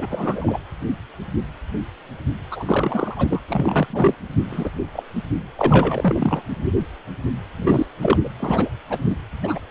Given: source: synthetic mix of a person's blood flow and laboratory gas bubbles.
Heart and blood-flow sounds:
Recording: Doppler ultrasound of blood flow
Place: precordium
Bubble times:
0.00-0.07 s: bubbles
0.10-0.59 s: bubbles
2.51-3.28 s: bubbles
3.30-3.41 s: bubbles
3.48-3.88 s: bubbles
3.90-4.14 s: bubbles
4.50-4.71 s: bubbles
4.92-5.03 s: bubbles
5.56-6.42 s: bubbles
7.56-7.86 s: bubbles
8.01-8.18 s: bubbles
8.23-8.29 s: bubbles
8.39-8.70 s: bubbles
8.89-8.98 s: bubbles
9.09-9.16 s: bubbles
9.43-9.58 s: bubbles
9.68-9.71 s: bubbles
From the record:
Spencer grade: 3 (all of the cardiac periods contain showers or single bubble signals, but not dominating or overriding the cardiac motion signals)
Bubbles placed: anywhere in the cardiac cycle

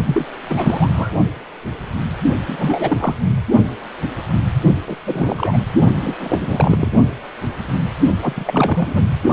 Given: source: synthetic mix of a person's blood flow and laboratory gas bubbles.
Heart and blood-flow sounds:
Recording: Doppler ultrasound of blood flow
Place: precordium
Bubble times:
0.06-0.26 s: bubbles
0.49-1.09 s: bubbles
2.46-3.14 s: bubbles
4.87-4.96 s: bubbles
5.05-5.60 s: bubbles
6.01-6.92 s: bubbles
8.22-8.33 s: bubbles
8.36-9.04 s: bubbles
From the record:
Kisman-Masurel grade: 332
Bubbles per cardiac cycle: rolling drumbeat, 9 or more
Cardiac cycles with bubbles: 50 to 99%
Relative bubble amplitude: moderate (0.250 to 0.450)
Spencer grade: 3 (all of the cardiac periods contain showers or single bubble signals, but not dominating or overriding the cardiac motion signals)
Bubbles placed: only in the low amplitude regions of the cardiac cycle

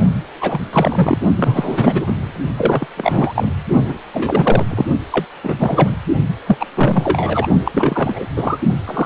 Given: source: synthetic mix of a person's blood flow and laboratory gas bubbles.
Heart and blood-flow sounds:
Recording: Doppler ultrasound of blood flow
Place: precordium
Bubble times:
0.41-0.60 s: bubbles
0.73-1.24 s: bubbles
1.35-2.31 s: bubbles
2.56-2.87 s: bubbles
2.97-3.52 s: bubbles
3.85-3.98 s: bubbles
4.12-4.66 s: bubbles
4.70-4.86 s: bubbles
5.12-5.24 s: bubbles
5.44-5.55 s: bubbles
5.58-5.97 s: bubbles
6.47-6.66 s: bubbles
6.74-7.48 s: bubbles
7.64-8.25 s: bubbles
8.36-8.58 s: bubbles
8.86-9.05 s: bubbles
From the record:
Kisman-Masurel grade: 343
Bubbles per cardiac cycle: rolling drumbeat, 9 or more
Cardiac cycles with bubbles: 100%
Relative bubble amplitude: loud (0.450 to 0.775)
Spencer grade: 3 (all of the cardiac periods contain showers or single bubble signals, but not dominating or overriding the cardiac motion signals)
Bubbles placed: only in the low amplitude regions of the cardiac cycle

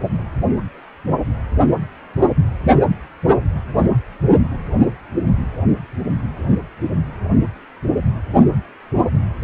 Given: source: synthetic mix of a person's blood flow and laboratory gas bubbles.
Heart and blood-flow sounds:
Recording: Doppler ultrasound of blood flow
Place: precordium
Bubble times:
2.75-2.83 s: bubbles
From the record:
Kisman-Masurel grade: 112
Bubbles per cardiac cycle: 1 to 2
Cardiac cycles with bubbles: 1 to 10%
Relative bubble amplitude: moderate (0.250 to 0.450)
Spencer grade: 1 (occasional bubble signal discernible with the cardiac motion signal, with majority of cardiac periods free of bubbles)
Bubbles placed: anywhere in the cardiac cycle

